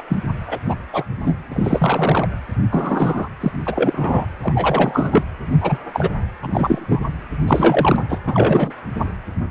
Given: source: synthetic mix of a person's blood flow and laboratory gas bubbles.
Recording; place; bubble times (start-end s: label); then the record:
Doppler ultrasound of blood flow; precordium
0.00-0.02 s: bubbles
0.08-0.18 s: bubbles
0.47-0.58 s: bubbles
0.68-0.75 s: bubbles
0.93-1.04 s: bubbles
1.20-1.35 s: bubbles
1.51-2.29 s: bubbles
2.70-3.29 s: bubbles
3.40-3.51 s: bubbles
3.66-4.25 s: bubbles
4.42-5.23 s: bubbles
5.60-5.79 s: bubbles
5.93-6.09 s: bubbles
6.42-7.12 s: bubbles
7.47-8.04 s: bubbles
8.09-8.19 s: bubbles
8.27-8.72 s: bubbles
From the record:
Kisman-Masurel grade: 233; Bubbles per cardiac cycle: several, 3 to 8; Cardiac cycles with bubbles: 50 to 99%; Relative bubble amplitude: loud (0.450 to 0.775); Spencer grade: 3 (all of the cardiac periods contain showers or single bubble signals, but not dominating or overriding the cardiac motion signals); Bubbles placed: anywhere in the cardiac cycle